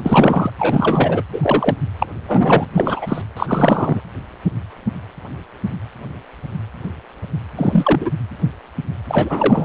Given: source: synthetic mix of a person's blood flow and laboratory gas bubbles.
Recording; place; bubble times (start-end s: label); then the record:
Doppler ultrasound of blood flow; precordium
0.00-0.50 s: bubbles
0.58-1.22 s: bubbles
1.32-1.76 s: bubbles
1.99-2.06 s: bubbles
2.27-2.65 s: bubbles
2.73-3.22 s: bubbles
3.37-4.01 s: bubbles
7.56-8.11 s: bubbles
9.08-9.65 s: bubbles
From the record:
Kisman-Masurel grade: 233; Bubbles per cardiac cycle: several, 3 to 8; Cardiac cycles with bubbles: 50 to 99%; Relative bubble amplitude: loud (0.450 to 0.775); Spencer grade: 3 (all of the cardiac periods contain showers or single bubble signals, but not dominating or overriding the cardiac motion signals); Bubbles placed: anywhere in the cardiac cycle